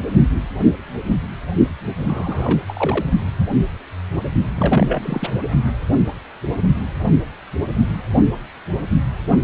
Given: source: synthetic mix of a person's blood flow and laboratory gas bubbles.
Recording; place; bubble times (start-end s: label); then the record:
Doppler ultrasound of blood flow; precordium
2.02-3.06 s: bubbles
4.56-5.29 s: bubbles
From the record:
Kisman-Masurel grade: 222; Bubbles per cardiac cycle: several, 3 to 8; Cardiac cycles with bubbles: 10 to 50%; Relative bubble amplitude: moderate (0.250 to 0.450); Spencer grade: 2 (many but less than half of the cardiac periods contain bubble signals, singularly or in groups); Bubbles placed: only in the low amplitude regions of the cardiac cycle